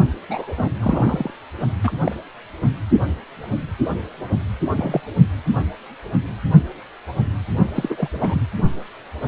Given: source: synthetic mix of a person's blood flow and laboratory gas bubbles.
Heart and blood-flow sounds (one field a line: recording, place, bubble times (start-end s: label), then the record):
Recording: Doppler ultrasound of blood flow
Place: precordium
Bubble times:
0.29-0.54 s: bubbles
0.56-0.69 s: bubbles
0.80-1.31 s: bubbles
1.83-1.92 s: bubbles
2.02-2.16 s: bubbles
4.76-5.00 s: bubbles
7.74-8.08 s: bubbles
8.14-8.42 s: bubbles
From the record:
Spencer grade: 2 (many but less than half of the cardiac periods contain bubble signals, singularly or in groups)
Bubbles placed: only in the low amplitude regions of the cardiac cycle